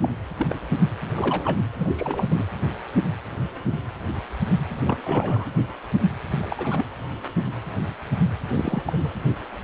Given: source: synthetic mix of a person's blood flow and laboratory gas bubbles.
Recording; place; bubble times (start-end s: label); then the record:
Doppler ultrasound of blood flow; precordium
0.02-0.11 s: bubbles
0.38-0.46 s: bubbles
0.49-0.59 s: bubbles
1.16-1.67 s: bubbles
1.79-2.46 s: bubbles
4.84-5.47 s: bubbles
6.30-6.86 s: bubbles
8.53-8.82 s: bubbles
8.87-9.10 s: bubbles
From the record:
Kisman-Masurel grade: 221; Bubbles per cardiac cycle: several, 3 to 8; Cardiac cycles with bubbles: 10 to 50%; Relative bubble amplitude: barely perceptible (0.100 to 0.250); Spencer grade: 2 (many but less than half of the cardiac periods contain bubble signals, singularly or in groups); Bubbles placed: anywhere in the cardiac cycle